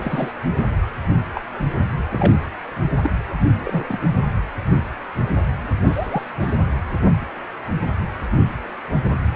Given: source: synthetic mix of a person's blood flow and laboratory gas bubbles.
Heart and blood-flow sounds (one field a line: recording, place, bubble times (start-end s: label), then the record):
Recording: Doppler ultrasound of blood flow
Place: precordium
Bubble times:
0.01-0.31 s: bubbles
1.35-1.40 s: bubbles
2.10-2.41 s: bubbles
3.02-3.11 s: bubbles
3.65-3.98 s: bubbles
5.85-6.24 s: bubbles
6.39-6.57 s: bubbles
From the record:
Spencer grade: 2 (many but less than half of the cardiac periods contain bubble signals, singularly or in groups)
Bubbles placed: anywhere in the cardiac cycle